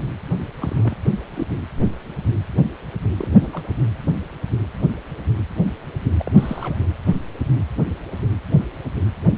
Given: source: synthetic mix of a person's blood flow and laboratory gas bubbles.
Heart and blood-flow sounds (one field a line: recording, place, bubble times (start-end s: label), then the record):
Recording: Doppler ultrasound of blood flow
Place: precordium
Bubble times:
0.60-0.99 s: bubbles
1.35-1.46 s: bubbles
3.17-3.63 s: bubbles
3.67-3.71 s: bubbles
6.19-6.75 s: bubbles
From the record:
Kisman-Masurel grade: 221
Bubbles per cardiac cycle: several, 3 to 8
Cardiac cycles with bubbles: 10 to 50%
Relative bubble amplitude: barely perceptible (0.100 to 0.250)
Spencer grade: 2 (many but less than half of the cardiac periods contain bubble signals, singularly or in groups)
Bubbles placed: anywhere in the cardiac cycle